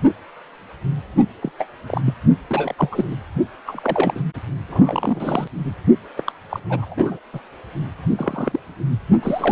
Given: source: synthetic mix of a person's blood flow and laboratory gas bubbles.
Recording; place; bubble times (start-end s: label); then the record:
Doppler ultrasound of blood flow; precordium
1.43-1.51 s: bubbles
1.58-1.65 s: bubbles
1.86-2.02 s: bubbles
2.05-2.13 s: bubbles
2.50-2.74 s: bubbles
2.78-2.89 s: bubbles
2.92-3.04 s: bubbles
3.10-3.15 s: bubbles
3.66-4.25 s: bubbles
4.69-5.48 s: bubbles
6.17-6.32 s: bubbles
6.51-6.60 s: bubbles
6.69-6.95 s: bubbles
6.97-7.19 s: bubbles
7.33-7.40 s: bubbles
8.16-8.60 s: bubbles
9.22-9.52 s: bubbles
From the record:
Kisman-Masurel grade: 242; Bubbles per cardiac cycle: several, 3 to 8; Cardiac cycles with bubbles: 100%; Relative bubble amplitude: moderate (0.250 to 0.450); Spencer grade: 3 (all of the cardiac periods contain showers or single bubble signals, but not dominating or overriding the cardiac motion signals); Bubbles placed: only in the low amplitude regions of the cardiac cycle